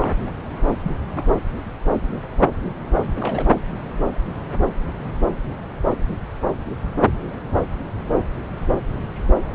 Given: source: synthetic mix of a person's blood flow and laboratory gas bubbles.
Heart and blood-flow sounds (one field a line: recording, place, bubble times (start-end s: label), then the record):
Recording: Doppler ultrasound of blood flow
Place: subclavian vein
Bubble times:
0.00-0.14 s: bubbles
0.84-0.92 s: bubbles
1.14-1.22 s: bubbles
3.19-3.57 s: bubbles
From the record:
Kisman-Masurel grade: 221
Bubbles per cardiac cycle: several, 3 to 8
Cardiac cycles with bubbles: 10 to 50%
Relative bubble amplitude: barely perceptible (0.100 to 0.250)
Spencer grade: 2 (many but less than half of the cardiac periods contain bubble signals, singularly or in groups)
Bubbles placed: anywhere in the cardiac cycle